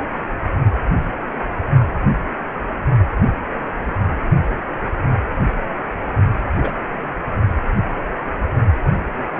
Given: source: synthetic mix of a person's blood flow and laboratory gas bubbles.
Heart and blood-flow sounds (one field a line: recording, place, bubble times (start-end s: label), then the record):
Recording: Doppler ultrasound of blood flow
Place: precordium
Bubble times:
6.60-6.71 s: bubbles
From the record:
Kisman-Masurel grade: 112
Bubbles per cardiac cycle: 1 to 2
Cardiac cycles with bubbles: 1 to 10%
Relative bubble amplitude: moderate (0.250 to 0.450)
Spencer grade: 1 (occasional bubble signal discernible with the cardiac motion signal, with majority of cardiac periods free of bubbles)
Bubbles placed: only in the low amplitude regions of the cardiac cycle